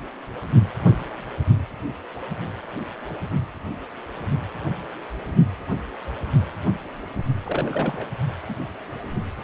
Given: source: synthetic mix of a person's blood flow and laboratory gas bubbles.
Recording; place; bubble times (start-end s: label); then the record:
Doppler ultrasound of blood flow; precordium
7.43-8.08 s: bubbles
8.48-8.54 s: bubbles
From the record:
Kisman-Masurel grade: 211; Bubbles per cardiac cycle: several, 3 to 8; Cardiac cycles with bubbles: 1 to 10%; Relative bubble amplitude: barely perceptible (0.100 to 0.250); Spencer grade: 1 (occasional bubble signal discernible with the cardiac motion signal, with majority of cardiac periods free of bubbles); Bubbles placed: only in the low amplitude regions of the cardiac cycle